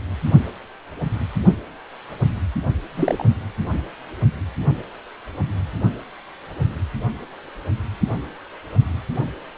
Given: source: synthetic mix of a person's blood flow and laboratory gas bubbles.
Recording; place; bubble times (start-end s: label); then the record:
Doppler ultrasound of blood flow; precordium
2.94-3.25 s: bubbles
From the record:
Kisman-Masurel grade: 213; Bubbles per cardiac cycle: several, 3 to 8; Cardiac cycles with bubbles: 1 to 10%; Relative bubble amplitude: loud (0.450 to 0.775); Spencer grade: 1 (occasional bubble signal discernible with the cardiac motion signal, with majority of cardiac periods free of bubbles); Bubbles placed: only in the low amplitude regions of the cardiac cycle